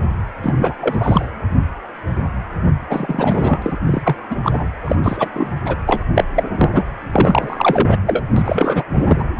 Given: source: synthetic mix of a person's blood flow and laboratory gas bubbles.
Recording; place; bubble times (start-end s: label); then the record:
Doppler ultrasound of blood flow; precordium
0.43-1.29 s: bubbles
2.89-3.77 s: bubbles
3.86-4.16 s: bubbles
4.30-4.36 s: bubbles
4.43-4.67 s: bubbles
4.85-4.96 s: bubbles
5.03-5.29 s: bubbles
5.33-5.50 s: bubbles
5.66-5.76 s: bubbles
5.86-6.04 s: bubbles
6.15-6.24 s: bubbles
6.36-6.44 s: bubbles
6.54-6.70 s: bubbles
6.73-6.84 s: bubbles
7.12-7.97 s: bubbles
8.06-8.22 s: bubbles
8.36-8.83 s: bubbles
8.95-9.24 s: bubbles
From the record:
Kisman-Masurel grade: 333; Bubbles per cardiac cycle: rolling drumbeat, 9 or more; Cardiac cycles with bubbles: 50 to 99%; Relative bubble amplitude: loud (0.450 to 0.775); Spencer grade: 3 (all of the cardiac periods contain showers or single bubble signals, but not dominating or overriding the cardiac motion signals); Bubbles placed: anywhere in the cardiac cycle